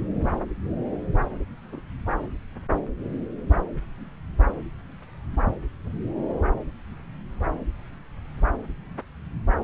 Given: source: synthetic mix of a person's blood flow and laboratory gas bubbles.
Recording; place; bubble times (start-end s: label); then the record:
Doppler ultrasound of blood flow; subclavian vein
1.72-1.81 s: bubbles
From the record:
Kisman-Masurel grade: 111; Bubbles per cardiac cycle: 1 to 2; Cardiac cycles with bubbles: 1 to 10%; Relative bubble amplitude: barely perceptible (0.100 to 0.250); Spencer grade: 1 (occasional bubble signal discernible with the cardiac motion signal, with majority of cardiac periods free of bubbles); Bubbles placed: anywhere in the cardiac cycle